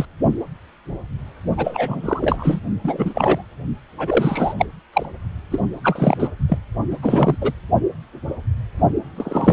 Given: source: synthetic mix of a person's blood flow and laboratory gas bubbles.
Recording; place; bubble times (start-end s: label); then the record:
Doppler ultrasound of blood flow; precordium
0.00-0.05 s: bubbles
1.57-2.60 s: bubbles
2.83-3.43 s: bubbles
3.98-4.54 s: bubbles
4.58-4.66 s: bubbles
4.93-5.06 s: bubbles
5.51-5.60 s: bubbles
5.83-6.29 s: bubbles
6.49-6.58 s: bubbles
6.91-6.97 s: bubbles
7.02-7.37 s: bubbles
7.41-7.52 s: bubbles
9.17-9.53 s: bubbles
From the record:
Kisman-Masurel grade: 332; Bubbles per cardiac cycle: rolling drumbeat, 9 or more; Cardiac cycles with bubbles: 50 to 99%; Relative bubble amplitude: moderate (0.250 to 0.450); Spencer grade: 3 (all of the cardiac periods contain showers or single bubble signals, but not dominating or overriding the cardiac motion signals); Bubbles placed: only in the low amplitude regions of the cardiac cycle